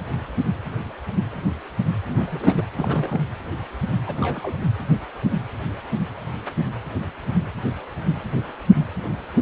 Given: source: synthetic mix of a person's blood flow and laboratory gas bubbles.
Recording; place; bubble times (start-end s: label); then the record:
Doppler ultrasound of blood flow; precordium
2.06-2.65 s: bubbles
2.78-3.21 s: bubbles
4.06-4.54 s: bubbles
8.96-9.16 s: bubbles
9.35-9.42 s: bubbles
From the record:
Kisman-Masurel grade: 221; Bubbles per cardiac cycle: several, 3 to 8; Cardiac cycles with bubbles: 10 to 50%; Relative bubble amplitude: barely perceptible (0.100 to 0.250); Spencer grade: 2 (many but less than half of the cardiac periods contain bubble signals, singularly or in groups); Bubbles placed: anywhere in the cardiac cycle